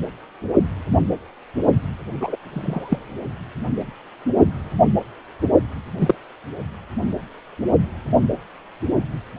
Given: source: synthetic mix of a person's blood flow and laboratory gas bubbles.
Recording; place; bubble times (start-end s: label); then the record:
Doppler ultrasound of blood flow; precordium
2.20-2.36 s: bubbles
2.52-2.99 s: bubbles
5.98-6.14 s: bubbles
From the record:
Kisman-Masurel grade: 123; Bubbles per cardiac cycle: 1 to 2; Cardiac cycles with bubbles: 10 to 50%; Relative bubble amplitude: loud (0.450 to 0.775); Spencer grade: 2 (many but less than half of the cardiac periods contain bubble signals, singularly or in groups); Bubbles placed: only in the low amplitude regions of the cardiac cycle